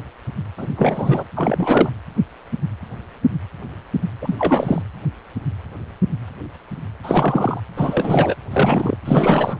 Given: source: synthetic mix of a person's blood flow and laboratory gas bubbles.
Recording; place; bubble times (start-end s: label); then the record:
Doppler ultrasound of blood flow; precordium
0.56-0.68 s: bubbles
0.75-1.24 s: bubbles
1.35-1.90 s: bubbles
4.21-4.82 s: bubbles
7.03-7.60 s: bubbles
7.76-8.35 s: bubbles
8.51-8.98 s: bubbles
9.06-9.59 s: bubbles
From the record:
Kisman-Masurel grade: 333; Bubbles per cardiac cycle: rolling drumbeat, 9 or more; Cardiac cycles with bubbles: 50 to 99%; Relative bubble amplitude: loud (0.450 to 0.775); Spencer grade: 3 (all of the cardiac periods contain showers or single bubble signals, but not dominating or overriding the cardiac motion signals); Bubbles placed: anywhere in the cardiac cycle